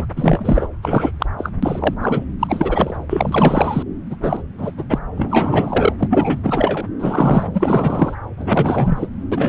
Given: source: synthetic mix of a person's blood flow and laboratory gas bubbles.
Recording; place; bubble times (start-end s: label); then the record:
Doppler ultrasound of blood flow; subclavian vein
0.00-0.05 s: bubbles
0.16-0.68 s: bubbles
0.82-1.11 s: bubbles
1.19-1.26 s: bubbles
1.38-1.50 s: bubbles
1.62-1.94 s: bubbles
2.00-2.24 s: bubbles
2.39-2.96 s: bubbles
3.09-3.83 s: bubbles
4.10-4.16 s: bubbles
4.22-4.42 s: bubbles
4.58-4.71 s: bubbles
4.77-4.84 s: bubbles
4.89-4.99 s: bubbles
5.17-5.93 s: bubbles
6.00-6.39 s: bubbles
6.43-6.87 s: bubbles
7.00-7.50 s: bubbles
7.54-8.15 s: bubbles
8.37-9.07 s: bubbles
9.32-9.49 s: bubbles
From the record:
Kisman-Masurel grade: 343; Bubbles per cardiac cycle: rolling drumbeat, 9 or more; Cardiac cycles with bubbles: 100%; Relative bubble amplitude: loud (0.450 to 0.775); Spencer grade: 3 (all of the cardiac periods contain showers or single bubble signals, but not dominating or overriding the cardiac motion signals); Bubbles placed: anywhere in the cardiac cycle